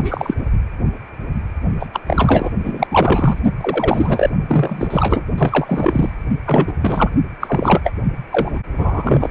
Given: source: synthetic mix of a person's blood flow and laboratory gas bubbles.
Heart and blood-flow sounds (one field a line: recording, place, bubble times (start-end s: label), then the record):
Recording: Doppler ultrasound of blood flow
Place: precordium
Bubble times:
0.00-0.34 s: bubbles
1.80-1.86 s: bubbles
1.93-2.00 s: bubbles
2.07-2.52 s: bubbles
2.64-2.87 s: bubbles
2.91-3.41 s: bubbles
3.60-4.29 s: bubbles
4.48-5.26 s: bubbles
5.38-6.09 s: bubbles
6.45-6.75 s: bubbles
6.81-7.10 s: bubbles
7.41-7.81 s: bubbles
7.83-7.93 s: bubbles
8.31-8.58 s: bubbles
8.78-9.31 s: bubbles
From the record:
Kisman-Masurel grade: 333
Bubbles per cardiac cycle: rolling drumbeat, 9 or more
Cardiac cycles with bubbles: 50 to 99%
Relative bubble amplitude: loud (0.450 to 0.775)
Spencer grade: 3 (all of the cardiac periods contain showers or single bubble signals, but not dominating or overriding the cardiac motion signals)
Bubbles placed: only in the low amplitude regions of the cardiac cycle